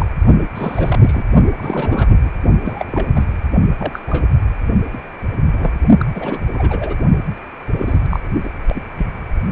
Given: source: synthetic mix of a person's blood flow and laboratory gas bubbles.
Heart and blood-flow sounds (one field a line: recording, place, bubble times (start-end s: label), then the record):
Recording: Doppler ultrasound of blood flow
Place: precordium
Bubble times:
0.00-0.06 s: bubbles
0.55-1.23 s: bubbles
1.55-2.30 s: bubbles
2.64-3.07 s: bubbles
3.16-3.25 s: bubbles
3.79-4.00 s: bubbles
4.08-4.27 s: bubbles
4.93-4.98 s: bubbles
5.52-5.75 s: bubbles
5.99-6.05 s: bubbles
6.14-6.40 s: bubbles
6.53-6.95 s: bubbles
7.71-8.05 s: bubbles
8.10-8.20 s: bubbles
8.42-8.51 s: bubbles
8.69-8.82 s: bubbles
8.98-9.07 s: bubbles
From the record:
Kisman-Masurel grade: 242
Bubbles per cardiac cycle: several, 3 to 8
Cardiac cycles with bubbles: 100%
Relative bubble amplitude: moderate (0.250 to 0.450)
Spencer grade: 3 (all of the cardiac periods contain showers or single bubble signals, but not dominating or overriding the cardiac motion signals)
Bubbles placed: only in the low amplitude regions of the cardiac cycle